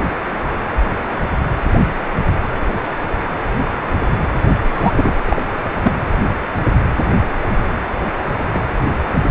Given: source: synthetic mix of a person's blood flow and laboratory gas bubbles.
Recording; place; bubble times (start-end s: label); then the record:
Doppler ultrasound of blood flow; precordium
4.73-4.92 s: bubbles
4.96-5.13 s: bubbles
5.25-5.42 s: bubbles
5.82-5.92 s: bubbles
8.53-8.61 s: bubbles
From the record:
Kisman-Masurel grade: 123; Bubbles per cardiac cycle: 1 to 2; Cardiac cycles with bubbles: 10 to 50%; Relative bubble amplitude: loud (0.450 to 0.775); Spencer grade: 2 (many but less than half of the cardiac periods contain bubble signals, singularly or in groups); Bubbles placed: anywhere in the cardiac cycle